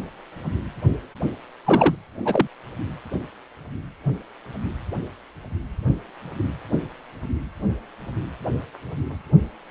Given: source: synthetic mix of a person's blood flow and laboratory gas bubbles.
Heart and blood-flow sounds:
Doppler ultrasound of blood flow; precordium
1.65-1.95 s: bubbles
2.24-2.48 s: bubbles
From the record:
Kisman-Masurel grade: 213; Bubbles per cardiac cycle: several, 3 to 8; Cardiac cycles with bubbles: 1 to 10%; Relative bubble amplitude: loud (0.450 to 0.775); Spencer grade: 1 (occasional bubble signal discernible with the cardiac motion signal, with majority of cardiac periods free of bubbles); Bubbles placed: anywhere in the cardiac cycle

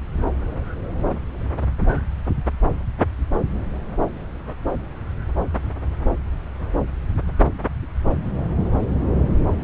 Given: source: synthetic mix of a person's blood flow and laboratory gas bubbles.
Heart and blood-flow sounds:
Doppler ultrasound of blood flow; subclavian vein
no bubbles
From the record:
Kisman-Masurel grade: 000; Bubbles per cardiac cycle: 0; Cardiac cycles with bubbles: 0%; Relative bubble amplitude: no bubbles discernible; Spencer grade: 0 (complete lack of bubble signals)

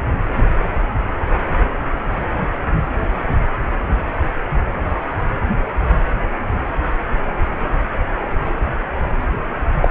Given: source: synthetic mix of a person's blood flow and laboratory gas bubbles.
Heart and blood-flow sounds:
Doppler ultrasound of blood flow; precordium
9.82-9.88 s: bubbles
From the record:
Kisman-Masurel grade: 213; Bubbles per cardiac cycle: several, 3 to 8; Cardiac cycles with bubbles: 1 to 10%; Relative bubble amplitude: loud (0.450 to 0.775); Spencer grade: 1 (occasional bubble signal discernible with the cardiac motion signal, with majority of cardiac periods free of bubbles); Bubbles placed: anywhere in the cardiac cycle

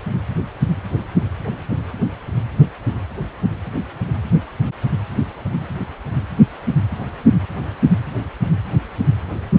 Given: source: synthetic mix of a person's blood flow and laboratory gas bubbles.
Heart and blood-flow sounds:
Doppler ultrasound of blood flow; precordium
no bubbles
From the record:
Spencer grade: 0 (complete lack of bubble signals)

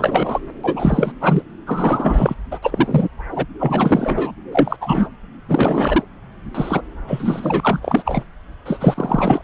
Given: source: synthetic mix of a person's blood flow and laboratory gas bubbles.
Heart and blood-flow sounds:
Doppler ultrasound of blood flow; subclavian vein
0.00-0.40 s: bubbles
0.64-1.12 s: bubbles
1.20-1.42 s: bubbles
1.67-2.34 s: bubbles
2.51-2.59 s: bubbles
2.62-3.08 s: bubbles
3.31-3.46 s: bubbles
3.59-4.31 s: bubbles
4.52-4.77 s: bubbles
4.81-5.08 s: bubbles
5.48-6.03 s: bubbles
6.54-6.82 s: bubbles
7.08-8.23 s: bubbles
8.65-9.42 s: bubbles
From the record:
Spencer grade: 3 (all of the cardiac periods contain showers or single bubble signals, but not dominating or overriding the cardiac motion signals); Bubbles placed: anywhere in the cardiac cycle

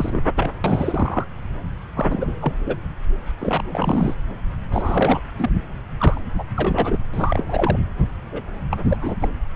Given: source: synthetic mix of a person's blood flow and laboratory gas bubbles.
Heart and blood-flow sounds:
Doppler ultrasound of blood flow; subclavian vein
0.00-0.21 s: bubbles
0.35-0.51 s: bubbles
0.64-1.24 s: bubbles
1.96-2.33 s: bubbles
2.42-2.52 s: bubbles
2.65-2.76 s: bubbles
3.41-3.62 s: bubbles
3.69-4.15 s: bubbles
4.71-5.19 s: bubbles
5.38-5.50 s: bubbles
5.97-6.21 s: bubbles
6.38-6.44 s: bubbles
6.56-6.98 s: bubbles
7.13-7.78 s: bubbles
8.32-8.42 s: bubbles
8.71-8.78 s: bubbles
8.88-9.16 s: bubbles
9.20-9.29 s: bubbles
From the record:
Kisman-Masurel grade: 342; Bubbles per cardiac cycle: rolling drumbeat, 9 or more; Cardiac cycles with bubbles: 100%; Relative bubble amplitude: moderate (0.250 to 0.450); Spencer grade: 3 (all of the cardiac periods contain showers or single bubble signals, but not dominating or overriding the cardiac motion signals); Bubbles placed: anywhere in the cardiac cycle

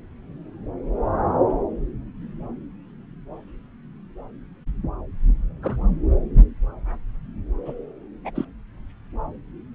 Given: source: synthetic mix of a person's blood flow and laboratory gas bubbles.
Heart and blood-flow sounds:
Doppler ultrasound of blood flow; subclavian vein
5.62-5.79 s: bubbles
7.66-7.73 s: bubbles
8.24-8.30 s: bubbles
8.36-8.45 s: bubbles
From the record:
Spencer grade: 2 (many but less than half of the cardiac periods contain bubble signals, singularly or in groups); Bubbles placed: anywhere in the cardiac cycle

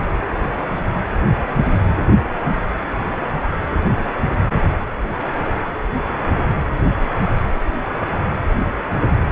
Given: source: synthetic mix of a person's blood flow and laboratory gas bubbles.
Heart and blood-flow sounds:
Doppler ultrasound of blood flow; precordium
0.00-0.02 s: bubbles
From the record:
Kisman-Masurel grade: 211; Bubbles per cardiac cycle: several, 3 to 8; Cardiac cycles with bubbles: 1 to 10%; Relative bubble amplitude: barely perceptible (0.100 to 0.250); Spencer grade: 1 (occasional bubble signal discernible with the cardiac motion signal, with majority of cardiac periods free of bubbles); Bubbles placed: anywhere in the cardiac cycle

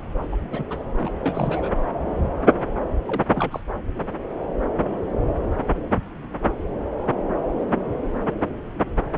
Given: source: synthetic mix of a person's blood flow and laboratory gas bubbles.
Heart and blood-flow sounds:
Doppler ultrasound of blood flow; subclavian vein
0.32-0.36 s: bubbles
0.51-0.64 s: bubbles
0.69-0.82 s: bubbles
0.97-1.10 s: bubbles
1.16-1.70 s: bubbles
3.07-3.27 s: bubbles
3.30-3.63 s: bubbles
From the record:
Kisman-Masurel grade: 221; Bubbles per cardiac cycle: several, 3 to 8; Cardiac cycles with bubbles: 10 to 50%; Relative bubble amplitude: barely perceptible (0.100 to 0.250); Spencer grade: 2 (many but less than half of the cardiac periods contain bubble signals, singularly or in groups); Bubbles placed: anywhere in the cardiac cycle

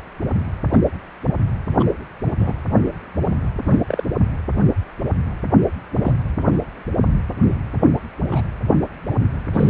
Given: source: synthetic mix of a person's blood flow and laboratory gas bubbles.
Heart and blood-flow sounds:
Doppler ultrasound of blood flow; precordium
0.72-0.79 s: bubbles
1.79-1.85 s: bubbles
2.39-2.54 s: bubbles
3.62-4.05 s: bubbles
5.93-6.16 s: bubbles
8.30-8.42 s: bubbles
9.54-9.70 s: bubbles
From the record:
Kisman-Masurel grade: 122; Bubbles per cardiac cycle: 1 to 2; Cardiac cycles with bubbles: 10 to 50%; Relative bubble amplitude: moderate (0.250 to 0.450); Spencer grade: 2 (many but less than half of the cardiac periods contain bubble signals, singularly or in groups); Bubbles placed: anywhere in the cardiac cycle

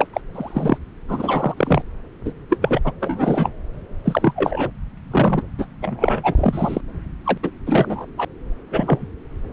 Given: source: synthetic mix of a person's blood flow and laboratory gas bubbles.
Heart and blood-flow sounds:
Doppler ultrasound of blood flow; subclavian vein
0.00-0.07 s: bubbles
0.13-0.21 s: bubbles
0.34-0.78 s: bubbles
1.08-1.54 s: bubbles
1.56-1.82 s: bubbles
2.25-2.32 s: bubbles
2.50-2.80 s: bubbles
2.84-2.92 s: bubbles
3.00-3.51 s: bubbles
4.04-4.33 s: bubbles
4.36-4.71 s: bubbles
5.11-5.42 s: bubbles
5.58-5.67 s: bubbles
5.82-6.21 s: bubbles
6.23-6.34 s: bubbles
6.37-6.81 s: bubbles
7.24-7.38 s: bubbles
7.42-7.50 s: bubbles
7.66-8.07 s: bubbles
8.18-8.25 s: bubbles
8.71-9.07 s: bubbles
From the record:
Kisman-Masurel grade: 233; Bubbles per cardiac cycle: several, 3 to 8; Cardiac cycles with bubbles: 50 to 99%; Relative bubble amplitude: loud (0.450 to 0.775); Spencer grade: 3 (all of the cardiac periods contain showers or single bubble signals, but not dominating or overriding the cardiac motion signals); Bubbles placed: anywhere in the cardiac cycle

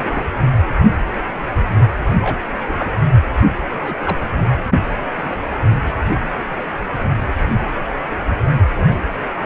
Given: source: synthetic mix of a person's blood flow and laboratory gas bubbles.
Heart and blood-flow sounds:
Doppler ultrasound of blood flow; precordium
0.00-0.25 s: bubbles
2.22-2.39 s: bubbles
2.65-2.95 s: bubbles
3.79-4.17 s: bubbles
5.17-5.38 s: bubbles
8.75-8.98 s: bubbles
From the record:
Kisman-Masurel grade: 121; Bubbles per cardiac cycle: 1 to 2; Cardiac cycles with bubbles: 10 to 50%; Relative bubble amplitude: barely perceptible (0.100 to 0.250); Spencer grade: 2 (many but less than half of the cardiac periods contain bubble signals, singularly or in groups); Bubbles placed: anywhere in the cardiac cycle

